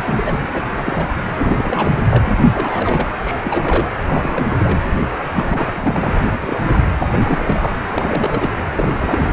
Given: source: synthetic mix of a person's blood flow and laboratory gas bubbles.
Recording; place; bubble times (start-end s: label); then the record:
Doppler ultrasound of blood flow; precordium
0.00-0.47 s: bubbles
0.53-0.70 s: bubbles
0.75-1.09 s: bubbles
1.38-1.93 s: bubbles
1.96-2.08 s: bubbles
2.10-2.23 s: bubbles
2.25-2.35 s: bubbles
2.53-3.10 s: bubbles
3.21-3.89 s: bubbles
4.05-4.78 s: bubbles
5.23-5.67 s: bubbles
5.74-6.20 s: bubbles
6.33-6.38 s: bubbles
6.42-6.82 s: bubbles
7.00-7.76 s: bubbles
7.89-8.51 s: bubbles
8.74-8.95 s: bubbles
8.98-9.33 s: bubbles
From the record:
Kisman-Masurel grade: 342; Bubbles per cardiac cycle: rolling drumbeat, 9 or more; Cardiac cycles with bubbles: 100%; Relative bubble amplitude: moderate (0.250 to 0.450); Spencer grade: 3 (all of the cardiac periods contain showers or single bubble signals, but not dominating or overriding the cardiac motion signals); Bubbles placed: anywhere in the cardiac cycle